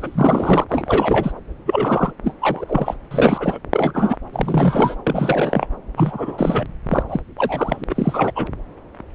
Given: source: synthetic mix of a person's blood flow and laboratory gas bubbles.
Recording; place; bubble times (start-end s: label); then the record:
Doppler ultrasound of blood flow; subclavian vein
0.00-0.65 s: bubbles
0.69-1.32 s: bubbles
1.66-2.12 s: bubbles
2.24-2.33 s: bubbles
2.41-2.96 s: bubbles
3.11-3.58 s: bubbles
3.72-4.17 s: bubbles
4.32-4.96 s: bubbles
5.07-5.67 s: bubbles
5.96-6.66 s: bubbles
6.88-7.03 s: bubbles
7.08-7.21 s: bubbles
7.38-7.84 s: bubbles
7.89-8.32 s: bubbles
8.35-8.46 s: bubbles
From the record:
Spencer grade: 3 (all of the cardiac periods contain showers or single bubble signals, but not dominating or overriding the cardiac motion signals); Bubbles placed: anywhere in the cardiac cycle